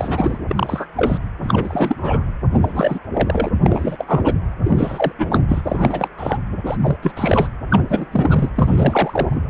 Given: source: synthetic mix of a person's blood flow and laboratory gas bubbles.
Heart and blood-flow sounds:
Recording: Doppler ultrasound of blood flow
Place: precordium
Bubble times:
0.00-0.38 s: bubbles
0.49-0.86 s: bubbles
0.96-1.18 s: bubbles
1.43-2.24 s: bubbles
2.51-2.98 s: bubbles
3.14-3.48 s: bubbles
3.62-3.96 s: bubbles
3.98-4.33 s: bubbles
4.64-5.12 s: bubbles
5.18-5.42 s: bubbles
5.48-5.61 s: bubbles
5.63-6.08 s: bubbles
6.17-6.38 s: bubbles
6.65-6.77 s: bubbles
6.82-6.96 s: bubbles
7.02-7.11 s: bubbles
7.16-7.48 s: bubbles
7.69-7.84 s: bubbles
7.88-8.06 s: bubbles
8.12-8.49 s: bubbles
8.54-9.41 s: bubbles
From the record:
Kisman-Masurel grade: 342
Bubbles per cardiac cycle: rolling drumbeat, 9 or more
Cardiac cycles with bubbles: 100%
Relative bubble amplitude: moderate (0.250 to 0.450)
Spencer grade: 3 (all of the cardiac periods contain showers or single bubble signals, but not dominating or overriding the cardiac motion signals)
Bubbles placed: anywhere in the cardiac cycle

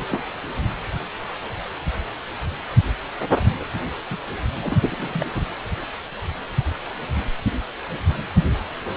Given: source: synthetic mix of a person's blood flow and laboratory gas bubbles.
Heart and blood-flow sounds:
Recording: Doppler ultrasound of blood flow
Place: precordium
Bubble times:
0.00-0.07 s: bubbles
0.10-0.23 s: bubbles
3.59-3.65 s: bubbles
4.11-4.17 s: bubbles
4.62-5.28 s: bubbles
5.34-5.46 s: bubbles
From the record:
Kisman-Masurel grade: 221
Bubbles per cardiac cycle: several, 3 to 8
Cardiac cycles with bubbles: 10 to 50%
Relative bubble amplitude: barely perceptible (0.100 to 0.250)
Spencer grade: 2 (many but less than half of the cardiac periods contain bubble signals, singularly or in groups)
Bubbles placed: anywhere in the cardiac cycle

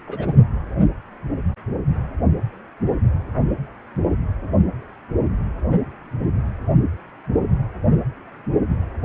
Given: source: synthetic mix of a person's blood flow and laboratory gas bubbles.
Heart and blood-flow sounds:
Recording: Doppler ultrasound of blood flow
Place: precordium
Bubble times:
0.07-0.35 s: bubbles
From the record:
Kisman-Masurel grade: 211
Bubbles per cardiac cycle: several, 3 to 8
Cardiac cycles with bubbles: 1 to 10%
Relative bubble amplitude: barely perceptible (0.100 to 0.250)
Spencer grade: 1 (occasional bubble signal discernible with the cardiac motion signal, with majority of cardiac periods free of bubbles)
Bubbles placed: anywhere in the cardiac cycle

